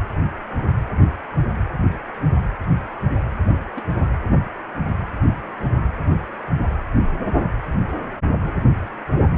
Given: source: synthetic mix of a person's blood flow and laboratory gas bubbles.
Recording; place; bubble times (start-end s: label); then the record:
Doppler ultrasound of blood flow; precordium
3.75-3.85 s: bubbles
4.04-4.08 s: bubbles
From the record:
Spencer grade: 1 (occasional bubble signal discernible with the cardiac motion signal, with majority of cardiac periods free of bubbles); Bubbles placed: anywhere in the cardiac cycle